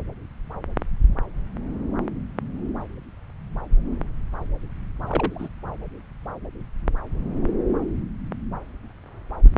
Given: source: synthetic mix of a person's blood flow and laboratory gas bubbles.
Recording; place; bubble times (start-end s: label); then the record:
Doppler ultrasound of blood flow; subclavian vein
5.07-5.48 s: bubbles
From the record:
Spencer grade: 1 (occasional bubble signal discernible with the cardiac motion signal, with majority of cardiac periods free of bubbles); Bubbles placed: anywhere in the cardiac cycle